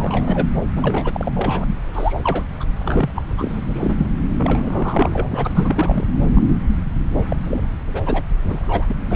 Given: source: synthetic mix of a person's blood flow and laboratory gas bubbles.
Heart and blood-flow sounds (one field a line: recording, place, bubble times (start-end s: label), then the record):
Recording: Doppler ultrasound of blood flow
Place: subclavian vein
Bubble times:
0.00-0.47 s: bubbles
0.58-0.65 s: bubbles
0.76-1.66 s: bubbles
1.93-2.20 s: bubbles
2.23-2.46 s: bubbles
2.60-2.64 s: bubbles
2.79-3.11 s: bubbles
3.15-3.23 s: bubbles
3.38-4.10 s: bubbles
4.38-6.05 s: bubbles
6.21-6.30 s: bubbles
6.34-6.46 s: bubbles
7.29-7.36 s: bubbles
7.45-7.63 s: bubbles
7.94-8.01 s: bubbles
8.05-8.23 s: bubbles
8.38-8.40 s: bubbles
8.45-9.03 s: bubbles
9.10-9.16 s: bubbles
From the record:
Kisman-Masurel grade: 342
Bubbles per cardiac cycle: rolling drumbeat, 9 or more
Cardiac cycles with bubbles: 100%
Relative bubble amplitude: moderate (0.250 to 0.450)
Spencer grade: 3 (all of the cardiac periods contain showers or single bubble signals, but not dominating or overriding the cardiac motion signals)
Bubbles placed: anywhere in the cardiac cycle